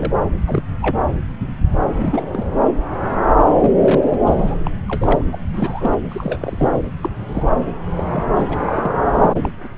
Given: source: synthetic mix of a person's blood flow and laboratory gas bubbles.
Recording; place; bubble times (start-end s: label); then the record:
Doppler ultrasound of blood flow; subclavian vein
0.00-0.12 s: bubbles
0.47-0.62 s: bubbles
0.81-1.02 s: bubbles
1.97-2.45 s: bubbles
3.61-3.76 s: bubbles
3.83-4.00 s: bubbles
4.07-4.18 s: bubbles
4.25-4.54 s: bubbles
4.65-4.71 s: bubbles
4.88-5.24 s: bubbles
5.32-5.38 s: bubbles
5.54-5.97 s: bubbles
6.09-6.68 s: bubbles
7.02-7.10 s: bubbles
7.28-7.43 s: bubbles
7.96-8.05 s: bubbles
8.09-8.23 s: bubbles
8.36-8.57 s: bubbles
8.66-8.91 s: bubbles
9.18-9.39 s: bubbles
9.42-9.49 s: bubbles
9.63-9.68 s: bubbles
From the record:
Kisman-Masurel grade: 232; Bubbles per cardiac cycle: several, 3 to 8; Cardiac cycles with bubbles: 50 to 99%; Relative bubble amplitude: moderate (0.250 to 0.450); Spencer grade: 3 (all of the cardiac periods contain showers or single bubble signals, but not dominating or overriding the cardiac motion signals); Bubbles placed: anywhere in the cardiac cycle